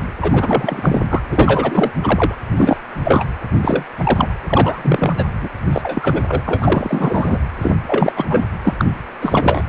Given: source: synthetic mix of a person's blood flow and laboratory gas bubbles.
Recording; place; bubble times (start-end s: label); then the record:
Doppler ultrasound of blood flow; precordium
0.00-0.03 s: bubbles
0.20-1.00 s: bubbles
1.09-1.20 s: bubbles
1.31-1.92 s: bubbles
2.02-2.35 s: bubbles
2.57-2.78 s: bubbles
3.04-3.24 s: bubbles
3.61-3.84 s: bubbles
3.96-4.35 s: bubbles
4.44-5.24 s: bubbles
5.40-5.49 s: bubbles
5.73-6.25 s: bubbles
6.29-6.42 s: bubbles
6.46-7.38 s: bubbles
7.61-7.71 s: bubbles
7.87-8.12 s: bubbles
8.15-8.26 s: bubbles
8.29-8.47 s: bubbles
8.64-8.74 s: bubbles
8.79-8.85 s: bubbles
9.21-9.62 s: bubbles
9.67-9.69 s: bubbles
From the record:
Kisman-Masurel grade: 343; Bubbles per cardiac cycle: rolling drumbeat, 9 or more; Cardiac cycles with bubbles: 100%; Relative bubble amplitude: loud (0.450 to 0.775); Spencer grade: 3 (all of the cardiac periods contain showers or single bubble signals, but not dominating or overriding the cardiac motion signals); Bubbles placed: anywhere in the cardiac cycle